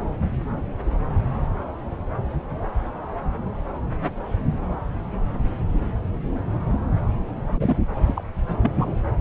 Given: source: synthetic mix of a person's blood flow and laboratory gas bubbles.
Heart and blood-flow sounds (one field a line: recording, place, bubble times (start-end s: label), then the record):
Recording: Doppler ultrasound of blood flow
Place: subclavian vein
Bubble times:
7.50-7.76 s: bubbles
8.06-8.24 s: bubbles
8.62-8.71 s: bubbles
8.75-8.97 s: bubbles
From the record:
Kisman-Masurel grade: 212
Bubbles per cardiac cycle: several, 3 to 8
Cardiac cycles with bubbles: 1 to 10%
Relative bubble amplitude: moderate (0.250 to 0.450)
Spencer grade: 1 (occasional bubble signal discernible with the cardiac motion signal, with majority of cardiac periods free of bubbles)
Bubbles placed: anywhere in the cardiac cycle